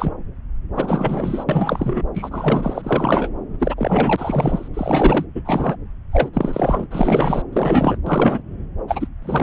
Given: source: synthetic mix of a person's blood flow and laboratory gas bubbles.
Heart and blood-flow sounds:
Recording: Doppler ultrasound of blood flow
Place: subclavian vein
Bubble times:
0.00-0.12 s: bubbles
0.76-1.44 s: bubbles
1.48-2.02 s: bubbles
2.15-3.29 s: bubbles
3.59-4.68 s: bubbles
4.74-5.25 s: bubbles
5.34-5.42 s: bubbles
5.45-5.75 s: bubbles
6.12-6.30 s: bubbles
6.33-6.86 s: bubbles
6.91-7.42 s: bubbles
7.52-7.97 s: bubbles
8.06-8.41 s: bubbles
8.88-9.08 s: bubbles
9.22-9.43 s: bubbles
From the record:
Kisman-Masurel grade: 343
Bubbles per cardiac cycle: rolling drumbeat, 9 or more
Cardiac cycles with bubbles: 100%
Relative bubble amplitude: loud (0.450 to 0.775)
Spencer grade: 3 (all of the cardiac periods contain showers or single bubble signals, but not dominating or overriding the cardiac motion signals)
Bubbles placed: anywhere in the cardiac cycle

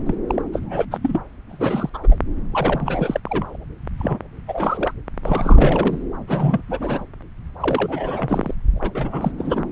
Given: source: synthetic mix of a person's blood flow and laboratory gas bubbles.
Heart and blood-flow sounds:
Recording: Doppler ultrasound of blood flow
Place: subclavian vein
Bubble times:
0.05-0.14 s: bubbles
0.27-0.42 s: bubbles
0.53-0.60 s: bubbles
0.63-0.85 s: bubbles
0.91-0.97 s: bubbles
1.02-1.19 s: bubbles
1.49-1.90 s: bubbles
1.94-1.98 s: bubbles
2.03-2.07 s: bubbles
2.10-2.17 s: bubbles
2.51-3.20 s: bubbles
3.25-3.56 s: bubbles
3.98-4.19 s: bubbles
4.47-4.93 s: bubbles
5.24-6.08 s: bubbles
6.28-6.61 s: bubbles
6.69-7.04 s: bubbles
7.60-8.54 s: bubbles
8.76-9.31 s: bubbles
9.38-9.63 s: bubbles
From the record:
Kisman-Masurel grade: 342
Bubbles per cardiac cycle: rolling drumbeat, 9 or more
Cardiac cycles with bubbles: 100%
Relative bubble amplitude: moderate (0.250 to 0.450)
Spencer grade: 3 (all of the cardiac periods contain showers or single bubble signals, but not dominating or overriding the cardiac motion signals)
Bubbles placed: anywhere in the cardiac cycle

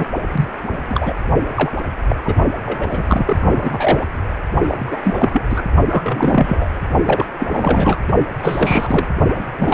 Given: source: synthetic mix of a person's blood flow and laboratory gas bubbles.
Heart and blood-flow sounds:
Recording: Doppler ultrasound of blood flow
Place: precordium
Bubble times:
0.00-0.05 s: bubbles
0.32-0.48 s: bubbles
0.71-0.78 s: bubbles
0.89-1.15 s: bubbles
1.55-1.72 s: bubbles
2.09-2.15 s: bubbles
2.24-2.35 s: bubbles
2.65-3.37 s: bubbles
3.42-4.07 s: bubbles
4.68-5.42 s: bubbles
5.50-5.62 s: bubbles
5.91-6.79 s: bubbles
7.05-7.25 s: bubbles
7.40-7.47 s: bubbles
7.50-7.97 s: bubbles
8.42-9.07 s: bubbles
9.34-9.46 s: bubbles
9.59-9.73 s: bubbles
From the record:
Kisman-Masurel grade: 343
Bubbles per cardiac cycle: rolling drumbeat, 9 or more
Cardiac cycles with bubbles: 100%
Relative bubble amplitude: loud (0.450 to 0.775)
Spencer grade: 3 (all of the cardiac periods contain showers or single bubble signals, but not dominating or overriding the cardiac motion signals)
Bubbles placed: only in the low amplitude regions of the cardiac cycle

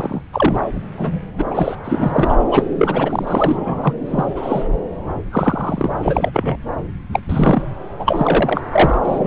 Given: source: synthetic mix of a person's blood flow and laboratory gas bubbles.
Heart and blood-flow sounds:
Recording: Doppler ultrasound of blood flow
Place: subclavian vein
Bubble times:
0.00-0.22 s: bubbles
0.33-0.59 s: bubbles
0.97-1.19 s: bubbles
1.38-1.76 s: bubbles
1.84-2.42 s: bubbles
2.51-2.63 s: bubbles
2.78-3.93 s: bubbles
4.07-4.68 s: bubbles
5.31-5.89 s: bubbles
5.99-6.30 s: bubbles
6.33-6.57 s: bubbles
7.13-7.20 s: bubbles
7.29-7.62 s: bubbles
8.00-8.61 s: bubbles
8.71-8.98 s: bubbles
9.05-9.27 s: bubbles
From the record:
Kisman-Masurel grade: 243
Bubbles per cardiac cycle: several, 3 to 8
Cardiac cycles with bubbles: 100%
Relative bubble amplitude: loud (0.450 to 0.775)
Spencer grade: 3 (all of the cardiac periods contain showers or single bubble signals, but not dominating or overriding the cardiac motion signals)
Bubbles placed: anywhere in the cardiac cycle

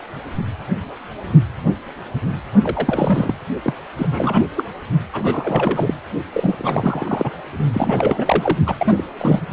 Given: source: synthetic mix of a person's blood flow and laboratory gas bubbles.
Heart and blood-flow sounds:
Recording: Doppler ultrasound of blood flow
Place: precordium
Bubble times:
2.63-3.35 s: bubbles
3.62-3.73 s: bubbles
3.97-4.46 s: bubbles
4.57-4.63 s: bubbles
5.12-5.94 s: bubbles
6.33-6.55 s: bubbles
6.58-7.31 s: bubbles
7.74-8.59 s: bubbles
8.66-8.75 s: bubbles
8.78-9.04 s: bubbles
9.18-9.42 s: bubbles
From the record:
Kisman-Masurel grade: 332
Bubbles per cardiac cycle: rolling drumbeat, 9 or more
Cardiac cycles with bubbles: 50 to 99%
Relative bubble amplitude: moderate (0.250 to 0.450)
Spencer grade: 3 (all of the cardiac periods contain showers or single bubble signals, but not dominating or overriding the cardiac motion signals)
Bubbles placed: only in the low amplitude regions of the cardiac cycle

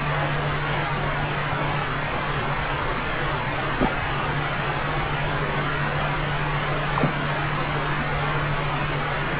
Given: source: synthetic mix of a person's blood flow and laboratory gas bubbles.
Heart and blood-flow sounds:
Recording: Doppler ultrasound of blood flow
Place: subclavian vein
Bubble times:
3.78-3.92 s: bubbles
6.93-7.12 s: bubbles
From the record:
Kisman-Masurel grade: 121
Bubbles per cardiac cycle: 1 to 2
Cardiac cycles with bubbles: 10 to 50%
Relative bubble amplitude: barely perceptible (0.100 to 0.250)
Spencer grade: 2 (many but less than half of the cardiac periods contain bubble signals, singularly or in groups)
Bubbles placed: anywhere in the cardiac cycle

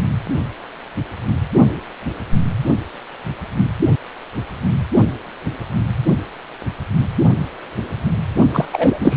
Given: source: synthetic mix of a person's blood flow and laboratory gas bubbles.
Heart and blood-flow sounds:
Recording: Doppler ultrasound of blood flow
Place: precordium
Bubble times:
8.53-8.65 s: bubbles
8.72-9.17 s: bubbles
From the record:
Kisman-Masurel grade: 213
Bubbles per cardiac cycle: several, 3 to 8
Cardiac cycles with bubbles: 1 to 10%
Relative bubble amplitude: loud (0.450 to 0.775)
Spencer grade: 1 (occasional bubble signal discernible with the cardiac motion signal, with majority of cardiac periods free of bubbles)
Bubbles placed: only in the low amplitude regions of the cardiac cycle

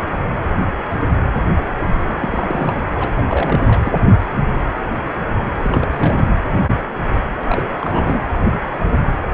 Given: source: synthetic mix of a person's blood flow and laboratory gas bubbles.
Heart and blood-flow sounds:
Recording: Doppler ultrasound of blood flow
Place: precordium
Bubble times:
1.79-1.89 s: bubbles
1.99-2.83 s: bubbles
2.96-3.11 s: bubbles
3.16-3.23 s: bubbles
3.28-3.92 s: bubbles
5.62-6.31 s: bubbles
7.40-8.23 s: bubbles
From the record:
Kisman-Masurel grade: 332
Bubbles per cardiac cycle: rolling drumbeat, 9 or more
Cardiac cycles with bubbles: 50 to 99%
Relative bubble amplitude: moderate (0.250 to 0.450)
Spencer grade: 3 (all of the cardiac periods contain showers or single bubble signals, but not dominating or overriding the cardiac motion signals)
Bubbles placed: anywhere in the cardiac cycle

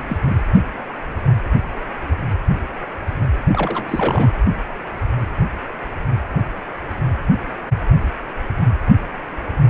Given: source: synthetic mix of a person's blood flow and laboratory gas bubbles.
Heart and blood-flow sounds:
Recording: Doppler ultrasound of blood flow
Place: precordium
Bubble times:
0.00-0.17 s: bubbles
0.22-0.34 s: bubbles
3.53-3.85 s: bubbles
3.88-4.30 s: bubbles
From the record:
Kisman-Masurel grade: 221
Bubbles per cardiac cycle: several, 3 to 8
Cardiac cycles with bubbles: 10 to 50%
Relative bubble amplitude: barely perceptible (0.100 to 0.250)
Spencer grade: 2 (many but less than half of the cardiac periods contain bubble signals, singularly or in groups)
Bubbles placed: anywhere in the cardiac cycle

